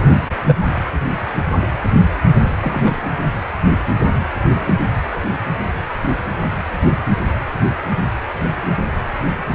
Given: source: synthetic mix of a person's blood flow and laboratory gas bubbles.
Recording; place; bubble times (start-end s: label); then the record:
Doppler ultrasound of blood flow; precordium
0.02-0.16 s: bubbles
0.47-0.55 s: bubbles
2.61-3.11 s: bubbles
4.61-4.76 s: bubbles
From the record:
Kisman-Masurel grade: 122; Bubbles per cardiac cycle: 1 to 2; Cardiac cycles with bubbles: 10 to 50%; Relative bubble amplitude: moderate (0.250 to 0.450); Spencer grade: 2 (many but less than half of the cardiac periods contain bubble signals, singularly or in groups); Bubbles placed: anywhere in the cardiac cycle